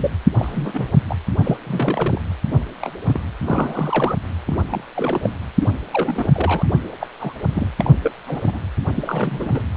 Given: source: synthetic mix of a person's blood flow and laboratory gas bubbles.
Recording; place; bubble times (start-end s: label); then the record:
Doppler ultrasound of blood flow; precordium
0.00-0.10 s: bubbles
0.38-0.89 s: bubbles
1.08-1.17 s: bubbles
1.40-1.57 s: bubbles
1.66-2.21 s: bubbles
2.51-2.57 s: bubbles
2.81-2.93 s: bubbles
3.06-3.20 s: bubbles
3.42-4.16 s: bubbles
4.46-4.64 s: bubbles
4.70-4.83 s: bubbles
4.96-5.31 s: bubbles
5.59-5.69 s: bubbles
5.91-6.66 s: bubbles
7.00-7.08 s: bubbles
7.20-7.33 s: bubbles
7.54-7.69 s: bubbles
7.78-7.91 s: bubbles
8.04-8.12 s: bubbles
8.27-8.60 s: bubbles
8.94-9.63 s: bubbles
From the record:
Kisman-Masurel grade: 242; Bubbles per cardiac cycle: several, 3 to 8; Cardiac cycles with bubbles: 100%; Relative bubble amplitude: moderate (0.250 to 0.450); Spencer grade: 3 (all of the cardiac periods contain showers or single bubble signals, but not dominating or overriding the cardiac motion signals); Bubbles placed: anywhere in the cardiac cycle